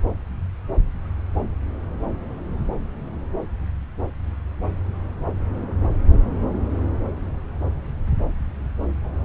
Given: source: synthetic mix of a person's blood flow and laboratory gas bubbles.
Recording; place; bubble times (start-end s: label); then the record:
Doppler ultrasound of blood flow; subclavian vein
no bubbles
From the record:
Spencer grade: 0 (complete lack of bubble signals)